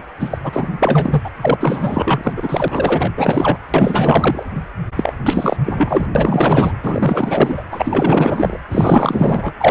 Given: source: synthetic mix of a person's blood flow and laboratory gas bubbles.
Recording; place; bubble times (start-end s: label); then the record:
Doppler ultrasound of blood flow; precordium
0.20-0.38 s: bubbles
0.43-0.71 s: bubbles
0.78-1.30 s: bubbles
1.41-1.54 s: bubbles
1.59-2.33 s: bubbles
2.36-3.12 s: bubbles
3.17-3.57 s: bubbles
3.74-4.43 s: bubbles
4.96-5.13 s: bubbles
5.25-5.56 s: bubbles
5.63-6.07 s: bubbles
6.15-6.72 s: bubbles
6.82-7.62 s: bubbles
7.71-8.58 s: bubbles
8.71-9.53 s: bubbles
9.59-9.71 s: bubbles
From the record:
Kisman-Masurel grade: 444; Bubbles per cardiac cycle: continuous sound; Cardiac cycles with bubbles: 100%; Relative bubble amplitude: maximal (0.775 to 0.999); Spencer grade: 4 (maximum detectable bubble signal sounding continuously throughout systole and diastole of every cardiac period, and overriding the amplitude of the normal cardiac signals); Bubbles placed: anywhere in the cardiac cycle